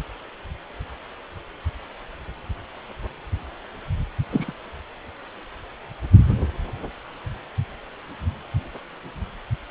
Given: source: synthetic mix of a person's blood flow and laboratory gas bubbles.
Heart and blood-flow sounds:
Doppler ultrasound of blood flow; precordium
4.31-4.53 s: bubbles
From the record:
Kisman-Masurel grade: 112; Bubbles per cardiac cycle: 1 to 2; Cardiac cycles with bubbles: 1 to 10%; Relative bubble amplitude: moderate (0.250 to 0.450); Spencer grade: 1 (occasional bubble signal discernible with the cardiac motion signal, with majority of cardiac periods free of bubbles); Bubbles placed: anywhere in the cardiac cycle

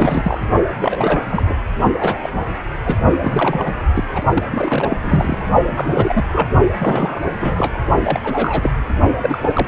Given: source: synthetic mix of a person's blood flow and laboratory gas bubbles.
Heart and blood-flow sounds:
Doppler ultrasound of blood flow; precordium
0.00-0.38 s: bubbles
0.78-1.21 s: bubbles
1.29-1.43 s: bubbles
1.48-1.56 s: bubbles
1.99-2.17 s: bubbles
2.22-2.30 s: bubbles
2.32-2.41 s: bubbles
2.85-2.97 s: bubbles
3.21-3.77 s: bubbles
3.94-4.04 s: bubbles
4.14-4.22 s: bubbles
4.33-4.43 s: bubbles
4.52-4.96 s: bubbles
5.02-5.47 s: bubbles
5.64-6.29 s: bubbles
6.31-6.48 s: bubbles
6.77-7.22 s: bubbles
7.39-7.74 s: bubbles
8.04-8.20 s: bubbles
8.24-8.71 s: bubbles
9.21-9.38 s: bubbles
9.43-9.68 s: bubbles
From the record:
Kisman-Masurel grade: 342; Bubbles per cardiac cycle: rolling drumbeat, 9 or more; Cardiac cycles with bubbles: 100%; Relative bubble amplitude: moderate (0.250 to 0.450); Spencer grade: 3 (all of the cardiac periods contain showers or single bubble signals, but not dominating or overriding the cardiac motion signals); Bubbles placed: only in the low amplitude regions of the cardiac cycle

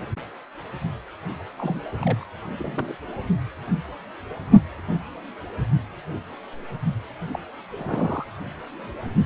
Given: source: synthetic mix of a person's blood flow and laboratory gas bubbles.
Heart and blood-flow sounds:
Doppler ultrasound of blood flow; precordium
1.57-1.81 s: bubbles
2.00-2.25 s: bubbles
2.57-2.95 s: bubbles
7.33-7.39 s: bubbles
7.79-8.26 s: bubbles
From the record:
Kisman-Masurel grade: 221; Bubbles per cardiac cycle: several, 3 to 8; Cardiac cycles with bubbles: 10 to 50%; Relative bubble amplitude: barely perceptible (0.100 to 0.250); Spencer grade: 2 (many but less than half of the cardiac periods contain bubble signals, singularly or in groups); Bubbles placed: anywhere in the cardiac cycle

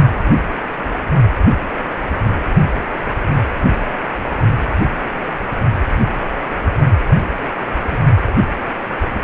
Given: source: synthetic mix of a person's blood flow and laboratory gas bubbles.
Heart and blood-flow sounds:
Doppler ultrasound of blood flow; precordium
7.91-7.99 s: bubbles
From the record:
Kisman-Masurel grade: 122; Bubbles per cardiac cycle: 1 to 2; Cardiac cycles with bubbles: 10 to 50%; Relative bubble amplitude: moderate (0.250 to 0.450); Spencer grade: 2 (many but less than half of the cardiac periods contain bubble signals, singularly or in groups); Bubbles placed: only in the low amplitude regions of the cardiac cycle

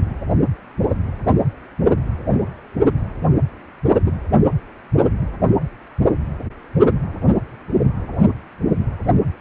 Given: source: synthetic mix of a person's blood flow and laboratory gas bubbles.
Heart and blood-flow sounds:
Doppler ultrasound of blood flow; precordium
4.04-4.13 s: bubbles
From the record:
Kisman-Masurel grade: 121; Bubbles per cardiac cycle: 1 to 2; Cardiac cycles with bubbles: 10 to 50%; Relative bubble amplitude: barely perceptible (0.100 to 0.250); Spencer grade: 2 (many but less than half of the cardiac periods contain bubble signals, singularly or in groups); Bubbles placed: anywhere in the cardiac cycle

